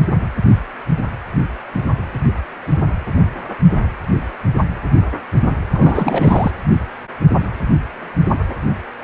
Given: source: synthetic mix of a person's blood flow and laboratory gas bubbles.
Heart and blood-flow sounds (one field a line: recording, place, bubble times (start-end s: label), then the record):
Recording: Doppler ultrasound of blood flow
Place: precordium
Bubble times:
5.73-6.51 s: bubbles
From the record:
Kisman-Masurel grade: 213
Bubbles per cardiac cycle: several, 3 to 8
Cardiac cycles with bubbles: 1 to 10%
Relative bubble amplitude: loud (0.450 to 0.775)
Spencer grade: 1 (occasional bubble signal discernible with the cardiac motion signal, with majority of cardiac periods free of bubbles)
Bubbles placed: anywhere in the cardiac cycle